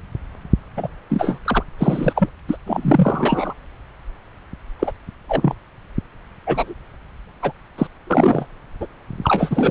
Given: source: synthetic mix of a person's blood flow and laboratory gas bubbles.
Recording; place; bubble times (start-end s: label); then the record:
Doppler ultrasound of blood flow; subclavian vein
0.76-0.89 s: bubbles
1.09-1.39 s: bubbles
1.44-1.63 s: bubbles
1.78-2.29 s: bubbles
2.48-2.57 s: bubbles
2.66-3.54 s: bubbles
4.79-4.92 s: bubbles
5.28-5.54 s: bubbles
6.47-6.74 s: bubbles
7.42-7.52 s: bubbles
7.78-7.87 s: bubbles
8.06-8.46 s: bubbles
8.80-8.88 s: bubbles
9.23-9.71 s: bubbles
From the record:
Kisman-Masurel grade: 233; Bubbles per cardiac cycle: several, 3 to 8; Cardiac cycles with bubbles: 50 to 99%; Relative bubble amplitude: loud (0.450 to 0.775); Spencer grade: 3 (all of the cardiac periods contain showers or single bubble signals, but not dominating or overriding the cardiac motion signals); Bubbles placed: anywhere in the cardiac cycle